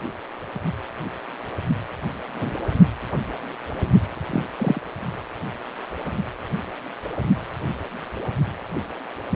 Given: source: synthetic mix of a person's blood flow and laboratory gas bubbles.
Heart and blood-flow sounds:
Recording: Doppler ultrasound of blood flow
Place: precordium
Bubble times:
2.38-2.56 s: bubbles
4.29-4.42 s: bubbles
4.58-4.81 s: bubbles
From the record:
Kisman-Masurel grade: 122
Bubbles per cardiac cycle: 1 to 2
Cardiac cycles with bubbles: 10 to 50%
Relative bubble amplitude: moderate (0.250 to 0.450)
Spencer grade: 2 (many but less than half of the cardiac periods contain bubble signals, singularly or in groups)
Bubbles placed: only in the low amplitude regions of the cardiac cycle

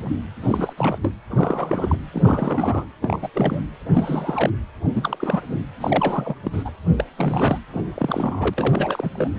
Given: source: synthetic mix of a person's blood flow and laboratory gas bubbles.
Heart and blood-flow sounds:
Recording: Doppler ultrasound of blood flow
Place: precordium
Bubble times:
0.00-0.15 s: bubbles
0.42-0.73 s: bubbles
0.77-0.98 s: bubbles
1.02-1.14 s: bubbles
1.29-1.96 s: bubbles
2.12-2.86 s: bubbles
3.02-3.29 s: bubbles
3.33-3.64 s: bubbles
3.93-4.51 s: bubbles
4.94-5.40 s: bubbles
5.48-5.62 s: bubbles
5.80-6.35 s: bubbles
6.44-6.71 s: bubbles
6.97-7.04 s: bubbles
7.17-7.59 s: bubbles
7.74-7.84 s: bubbles
7.95-9.10 s: bubbles
9.14-9.28 s: bubbles
From the record:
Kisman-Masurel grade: 342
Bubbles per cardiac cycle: rolling drumbeat, 9 or more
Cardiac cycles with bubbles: 100%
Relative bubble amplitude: moderate (0.250 to 0.450)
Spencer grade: 3 (all of the cardiac periods contain showers or single bubble signals, but not dominating or overriding the cardiac motion signals)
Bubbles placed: anywhere in the cardiac cycle

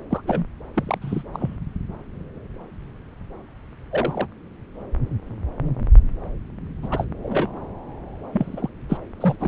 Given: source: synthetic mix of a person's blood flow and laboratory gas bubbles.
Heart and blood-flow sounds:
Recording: Doppler ultrasound of blood flow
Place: subclavian vein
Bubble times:
0.09-0.22 s: bubbles
0.26-0.47 s: bubbles
0.74-0.98 s: bubbles
1.01-1.23 s: bubbles
1.33-1.57 s: bubbles
3.91-4.27 s: bubbles
6.83-6.88 s: bubbles
6.91-7.06 s: bubbles
7.23-7.49 s: bubbles
8.32-8.69 s: bubbles
8.89-8.97 s: bubbles
9.21-9.35 s: bubbles
9.39-9.48 s: bubbles
From the record:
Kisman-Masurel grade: 222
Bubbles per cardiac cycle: several, 3 to 8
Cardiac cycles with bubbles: 10 to 50%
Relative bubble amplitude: moderate (0.250 to 0.450)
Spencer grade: 2 (many but less than half of the cardiac periods contain bubble signals, singularly or in groups)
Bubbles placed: anywhere in the cardiac cycle

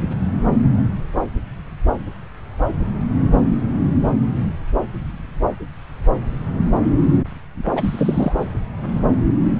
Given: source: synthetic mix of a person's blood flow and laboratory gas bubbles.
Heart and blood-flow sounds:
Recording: Doppler ultrasound of blood flow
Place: subclavian vein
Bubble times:
7.75-8.32 s: bubbles
From the record:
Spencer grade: 1 (occasional bubble signal discernible with the cardiac motion signal, with majority of cardiac periods free of bubbles)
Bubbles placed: anywhere in the cardiac cycle

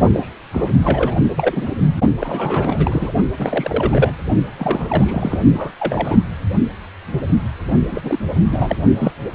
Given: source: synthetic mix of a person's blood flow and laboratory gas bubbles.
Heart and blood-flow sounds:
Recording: Doppler ultrasound of blood flow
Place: precordium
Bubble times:
0.00-0.08 s: bubbles
0.13-0.28 s: bubbles
0.53-0.71 s: bubbles
0.82-1.14 s: bubbles
1.36-1.70 s: bubbles
2.20-3.12 s: bubbles
3.38-4.14 s: bubbles
4.58-5.39 s: bubbles
5.52-5.72 s: bubbles
5.79-6.23 s: bubbles
7.91-8.19 s: bubbles
8.46-8.77 s: bubbles
8.97-9.12 s: bubbles
From the record:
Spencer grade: 3 (all of the cardiac periods contain showers or single bubble signals, but not dominating or overriding the cardiac motion signals)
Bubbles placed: only in the low amplitude regions of the cardiac cycle

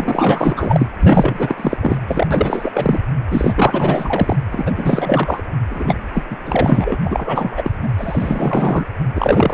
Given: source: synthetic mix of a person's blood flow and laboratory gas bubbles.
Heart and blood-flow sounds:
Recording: Doppler ultrasound of blood flow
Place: precordium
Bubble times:
0.00-0.86 s: bubbles
0.99-1.77 s: bubbles
1.80-1.97 s: bubbles
2.08-2.27 s: bubbles
2.31-3.01 s: bubbles
3.31-4.37 s: bubbles
4.51-5.41 s: bubbles
5.70-5.97 s: bubbles
6.13-6.36 s: bubbles
6.45-6.98 s: bubbles
7.05-7.71 s: bubbles
7.82-7.90 s: bubbles
7.97-8.85 s: bubbles
9.15-9.54 s: bubbles
From the record:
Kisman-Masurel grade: 444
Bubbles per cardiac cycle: continuous sound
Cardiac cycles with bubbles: 100%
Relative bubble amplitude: maximal (0.775 to 0.999)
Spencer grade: 4 (maximum detectable bubble signal sounding continuously throughout systole and diastole of every cardiac period, and overriding the amplitude of the normal cardiac signals)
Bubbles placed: anywhere in the cardiac cycle

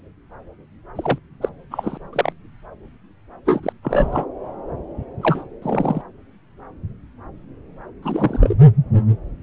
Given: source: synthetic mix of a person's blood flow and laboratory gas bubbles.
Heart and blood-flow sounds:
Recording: Doppler ultrasound of blood flow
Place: subclavian vein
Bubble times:
0.95-1.19 s: bubbles
1.41-1.49 s: bubbles
1.71-1.98 s: bubbles
2.12-2.33 s: bubbles
3.46-3.60 s: bubbles
3.63-3.73 s: bubbles
3.83-4.25 s: bubbles
5.21-5.43 s: bubbles
5.62-6.01 s: bubbles
8.03-8.56 s: bubbles
From the record:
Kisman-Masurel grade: 222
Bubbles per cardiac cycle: several, 3 to 8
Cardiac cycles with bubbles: 10 to 50%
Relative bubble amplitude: moderate (0.250 to 0.450)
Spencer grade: 2 (many but less than half of the cardiac periods contain bubble signals, singularly or in groups)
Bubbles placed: anywhere in the cardiac cycle

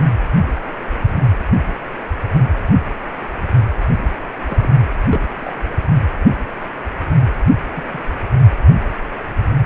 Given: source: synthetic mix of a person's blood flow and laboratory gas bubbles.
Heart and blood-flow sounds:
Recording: Doppler ultrasound of blood flow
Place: precordium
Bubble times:
4.45-4.70 s: bubbles
5.11-5.21 s: bubbles
5.38-5.54 s: bubbles
7.74-7.82 s: bubbles
7.88-8.02 s: bubbles
From the record:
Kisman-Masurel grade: 121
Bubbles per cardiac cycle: 1 to 2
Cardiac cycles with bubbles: 10 to 50%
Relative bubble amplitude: barely perceptible (0.100 to 0.250)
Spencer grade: 2 (many but less than half of the cardiac periods contain bubble signals, singularly or in groups)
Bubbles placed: anywhere in the cardiac cycle

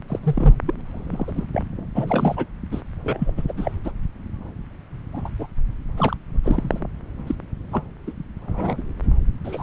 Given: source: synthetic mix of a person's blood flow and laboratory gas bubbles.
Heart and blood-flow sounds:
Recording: Doppler ultrasound of blood flow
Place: subclavian vein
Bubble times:
0.08-0.19 s: bubbles
0.23-0.57 s: bubbles
0.66-0.74 s: bubbles
0.78-0.81 s: bubbles
0.85-1.47 s: bubbles
1.53-1.62 s: bubbles
1.95-2.45 s: bubbles
2.71-2.82 s: bubbles
3.04-3.32 s: bubbles
3.37-3.42 s: bubbles
3.48-3.52 s: bubbles
3.57-3.71 s: bubbles
3.85-3.91 s: bubbles
5.13-5.22 s: bubbles
5.25-5.29 s: bubbles
5.39-5.46 s: bubbles
5.97-6.17 s: bubbles
6.44-6.80 s: bubbles
7.27-7.35 s: bubbles
7.72-7.82 s: bubbles
8.07-8.12 s: bubbles
8.47-8.82 s: bubbles
9.44-9.63 s: bubbles
From the record:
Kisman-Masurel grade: 242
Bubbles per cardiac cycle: several, 3 to 8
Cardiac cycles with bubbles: 100%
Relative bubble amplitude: moderate (0.250 to 0.450)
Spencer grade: 3 (all of the cardiac periods contain showers or single bubble signals, but not dominating or overriding the cardiac motion signals)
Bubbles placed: anywhere in the cardiac cycle

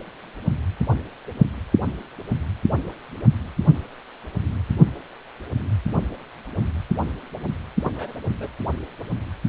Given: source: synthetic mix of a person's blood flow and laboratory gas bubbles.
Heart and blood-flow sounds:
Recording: Doppler ultrasound of blood flow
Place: precordium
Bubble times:
7.84-7.92 s: bubbles
7.96-8.14 s: bubbles
8.40-8.48 s: bubbles
From the record:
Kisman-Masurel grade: 211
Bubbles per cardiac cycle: several, 3 to 8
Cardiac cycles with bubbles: 1 to 10%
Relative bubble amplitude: barely perceptible (0.100 to 0.250)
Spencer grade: 1 (occasional bubble signal discernible with the cardiac motion signal, with majority of cardiac periods free of bubbles)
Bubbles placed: only in the low amplitude regions of the cardiac cycle

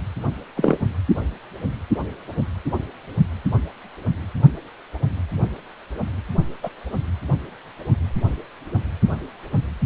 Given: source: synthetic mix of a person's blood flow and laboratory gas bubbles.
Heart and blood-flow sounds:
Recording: Doppler ultrasound of blood flow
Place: precordium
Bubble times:
0.56-0.77 s: bubbles
6.63-6.70 s: bubbles
From the record:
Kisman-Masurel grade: 123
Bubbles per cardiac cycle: 1 to 2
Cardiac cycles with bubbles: 10 to 50%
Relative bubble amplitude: loud (0.450 to 0.775)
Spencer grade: 2 (many but less than half of the cardiac periods contain bubble signals, singularly or in groups)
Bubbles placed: only in the low amplitude regions of the cardiac cycle

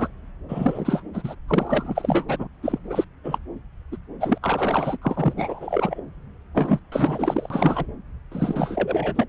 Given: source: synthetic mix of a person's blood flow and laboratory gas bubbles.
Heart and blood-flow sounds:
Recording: Doppler ultrasound of blood flow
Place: subclavian vein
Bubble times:
0.00-0.07 s: bubbles
0.48-1.01 s: bubbles
1.14-1.35 s: bubbles
1.48-2.47 s: bubbles
2.62-2.79 s: bubbles
2.90-3.04 s: bubbles
3.24-3.38 s: bubbles
3.92-3.96 s: bubbles
4.20-4.38 s: bubbles
4.42-4.97 s: bubbles
5.01-5.33 s: bubbles
5.36-6.00 s: bubbles
6.54-6.79 s: bubbles
6.92-7.87 s: bubbles
8.32-9.25 s: bubbles
From the record:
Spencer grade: 3 (all of the cardiac periods contain showers or single bubble signals, but not dominating or overriding the cardiac motion signals)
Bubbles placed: anywhere in the cardiac cycle

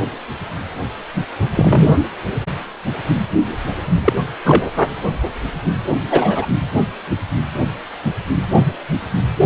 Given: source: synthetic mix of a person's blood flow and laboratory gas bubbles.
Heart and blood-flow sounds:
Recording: Doppler ultrasound of blood flow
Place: precordium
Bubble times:
1.55-1.97 s: bubbles
4.04-4.13 s: bubbles
4.45-4.64 s: bubbles
4.76-4.86 s: bubbles
6.10-6.46 s: bubbles
From the record:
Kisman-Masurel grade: 223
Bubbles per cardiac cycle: several, 3 to 8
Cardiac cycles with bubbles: 10 to 50%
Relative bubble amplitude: loud (0.450 to 0.775)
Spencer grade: 2 (many but less than half of the cardiac periods contain bubble signals, singularly or in groups)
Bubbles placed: anywhere in the cardiac cycle

